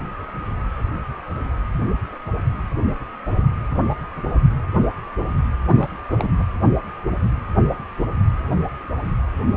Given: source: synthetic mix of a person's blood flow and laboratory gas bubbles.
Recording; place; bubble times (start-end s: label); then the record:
Doppler ultrasound of blood flow; precordium
5.69-5.90 s: bubbles
6.09-6.14 s: bubbles
6.19-6.29 s: bubbles
6.39-6.43 s: bubbles
From the record:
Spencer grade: 1 (occasional bubble signal discernible with the cardiac motion signal, with majority of cardiac periods free of bubbles); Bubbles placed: anywhere in the cardiac cycle